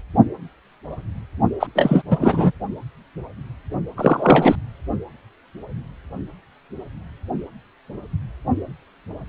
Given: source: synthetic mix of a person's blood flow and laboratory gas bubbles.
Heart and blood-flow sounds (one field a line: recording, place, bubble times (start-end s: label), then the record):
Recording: Doppler ultrasound of blood flow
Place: precordium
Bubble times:
1.59-1.67 s: bubbles
1.75-2.02 s: bubbles
2.10-2.52 s: bubbles
3.97-4.55 s: bubbles
From the record:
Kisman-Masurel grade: 223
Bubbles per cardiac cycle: several, 3 to 8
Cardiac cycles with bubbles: 10 to 50%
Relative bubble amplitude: loud (0.450 to 0.775)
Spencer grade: 2 (many but less than half of the cardiac periods contain bubble signals, singularly or in groups)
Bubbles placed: only in the low amplitude regions of the cardiac cycle